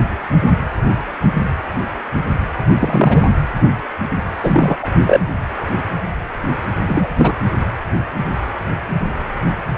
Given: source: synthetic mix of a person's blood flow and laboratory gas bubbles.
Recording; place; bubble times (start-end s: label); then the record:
Doppler ultrasound of blood flow; precordium
2.80-3.27 s: bubbles
4.43-4.78 s: bubbles
4.82-4.88 s: bubbles
5.06-5.20 s: bubbles
6.87-7.07 s: bubbles
7.18-7.32 s: bubbles
From the record:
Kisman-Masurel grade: 223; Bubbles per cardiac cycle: several, 3 to 8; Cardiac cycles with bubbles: 10 to 50%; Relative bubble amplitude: loud (0.450 to 0.775); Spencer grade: 2 (many but less than half of the cardiac periods contain bubble signals, singularly or in groups); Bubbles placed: anywhere in the cardiac cycle